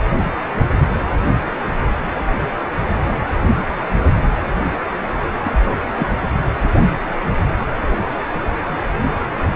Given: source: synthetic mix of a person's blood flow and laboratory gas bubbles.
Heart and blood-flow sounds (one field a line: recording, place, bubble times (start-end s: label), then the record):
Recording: Doppler ultrasound of blood flow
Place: precordium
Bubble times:
5.45-5.76 s: bubbles
5.97-6.08 s: bubbles
From the record:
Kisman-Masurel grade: 112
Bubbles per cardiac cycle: 1 to 2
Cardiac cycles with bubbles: 1 to 10%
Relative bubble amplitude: moderate (0.250 to 0.450)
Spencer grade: 1 (occasional bubble signal discernible with the cardiac motion signal, with majority of cardiac periods free of bubbles)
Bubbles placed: anywhere in the cardiac cycle